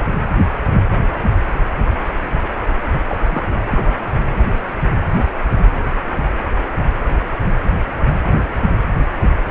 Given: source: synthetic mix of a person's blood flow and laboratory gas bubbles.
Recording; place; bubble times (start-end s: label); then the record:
Doppler ultrasound of blood flow; precordium
2.92-3.02 s: bubbles
3.08-3.46 s: bubbles
3.70-3.93 s: bubbles
From the record:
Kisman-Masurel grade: 212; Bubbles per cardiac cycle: several, 3 to 8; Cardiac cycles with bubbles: 1 to 10%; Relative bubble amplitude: moderate (0.250 to 0.450); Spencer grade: 1 (occasional bubble signal discernible with the cardiac motion signal, with majority of cardiac periods free of bubbles); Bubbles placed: anywhere in the cardiac cycle